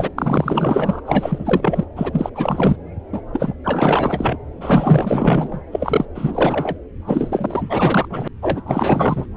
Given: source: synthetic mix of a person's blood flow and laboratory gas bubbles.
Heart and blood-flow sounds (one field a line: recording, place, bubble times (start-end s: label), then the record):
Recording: Doppler ultrasound of blood flow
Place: subclavian vein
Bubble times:
0.00-0.10 s: bubbles
0.17-1.01 s: bubbles
1.05-1.85 s: bubbles
1.96-2.30 s: bubbles
2.35-2.76 s: bubbles
3.12-3.21 s: bubbles
3.33-3.54 s: bubbles
3.64-4.38 s: bubbles
4.60-5.60 s: bubbles
5.72-6.05 s: bubbles
6.14-6.76 s: bubbles
7.06-8.28 s: bubbles
8.42-8.62 s: bubbles
8.65-9.26 s: bubbles
From the record:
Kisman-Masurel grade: 444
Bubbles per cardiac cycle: continuous sound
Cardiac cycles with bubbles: 100%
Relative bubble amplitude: maximal (0.775 to 0.999)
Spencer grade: 4 (maximum detectable bubble signal sounding continuously throughout systole and diastole of every cardiac period, and overriding the amplitude of the normal cardiac signals)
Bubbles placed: anywhere in the cardiac cycle